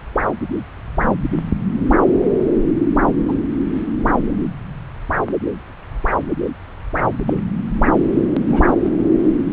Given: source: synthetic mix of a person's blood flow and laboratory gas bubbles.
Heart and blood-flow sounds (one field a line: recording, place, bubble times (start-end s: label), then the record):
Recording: Doppler ultrasound of blood flow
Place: subclavian vein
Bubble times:
1.30-1.40 s: bubbles
3.06-3.14 s: bubbles
3.28-3.33 s: bubbles
7.27-7.40 s: bubbles
8.48-8.75 s: bubbles
From the record:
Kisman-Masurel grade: 122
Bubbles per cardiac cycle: 1 to 2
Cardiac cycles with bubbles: 10 to 50%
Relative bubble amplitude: moderate (0.250 to 0.450)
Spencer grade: 2 (many but less than half of the cardiac periods contain bubble signals, singularly or in groups)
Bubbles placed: anywhere in the cardiac cycle